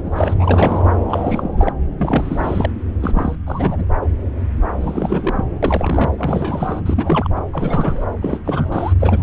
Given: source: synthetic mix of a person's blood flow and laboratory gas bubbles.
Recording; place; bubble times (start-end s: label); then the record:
Doppler ultrasound of blood flow; subclavian vein
0.00-0.34 s: bubbles
0.39-0.84 s: bubbles
1.09-1.73 s: bubbles
1.97-2.70 s: bubbles
3.00-3.35 s: bubbles
3.46-3.86 s: bubbles
4.80-5.45 s: bubbles
5.62-6.10 s: bubbles
6.18-6.79 s: bubbles
6.86-7.28 s: bubbles
7.36-7.41 s: bubbles
7.53-8.04 s: bubbles
8.22-8.39 s: bubbles
8.45-8.93 s: bubbles
8.99-9.23 s: bubbles
From the record:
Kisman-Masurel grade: 332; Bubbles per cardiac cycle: rolling drumbeat, 9 or more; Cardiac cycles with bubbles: 50 to 99%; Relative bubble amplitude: moderate (0.250 to 0.450); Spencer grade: 3 (all of the cardiac periods contain showers or single bubble signals, but not dominating or overriding the cardiac motion signals); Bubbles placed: anywhere in the cardiac cycle